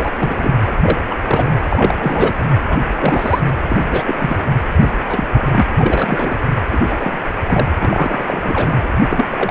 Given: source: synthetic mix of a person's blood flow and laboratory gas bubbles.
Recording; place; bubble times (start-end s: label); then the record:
Doppler ultrasound of blood flow; precordium
0.00-0.10 s: bubbles
0.15-0.55 s: bubbles
0.58-0.71 s: bubbles
0.81-0.98 s: bubbles
1.06-1.16 s: bubbles
1.27-1.52 s: bubbles
1.68-2.43 s: bubbles
2.69-2.79 s: bubbles
2.94-3.40 s: bubbles
3.69-3.77 s: bubbles
3.83-4.04 s: bubbles
4.06-4.37 s: bubbles
4.79-4.89 s: bubbles
5.09-5.27 s: bubbles
5.30-5.62 s: bubbles
5.77-6.40 s: bubbles
6.71-6.79 s: bubbles
6.89-7.22 s: bubbles
7.41-7.68 s: bubbles
7.79-8.88 s: bubbles
9.10-9.51 s: bubbles
From the record:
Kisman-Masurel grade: 243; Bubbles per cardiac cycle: several, 3 to 8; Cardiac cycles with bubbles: 100%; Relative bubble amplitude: loud (0.450 to 0.775); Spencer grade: 3 (all of the cardiac periods contain showers or single bubble signals, but not dominating or overriding the cardiac motion signals); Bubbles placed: anywhere in the cardiac cycle